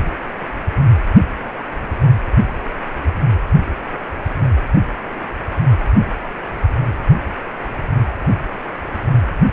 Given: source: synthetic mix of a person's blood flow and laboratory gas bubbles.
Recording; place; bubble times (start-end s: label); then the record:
Doppler ultrasound of blood flow; precordium
no bubbles
From the record:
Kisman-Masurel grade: 000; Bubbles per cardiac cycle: 0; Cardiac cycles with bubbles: 0%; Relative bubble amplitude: no bubbles discernible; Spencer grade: 0 (complete lack of bubble signals)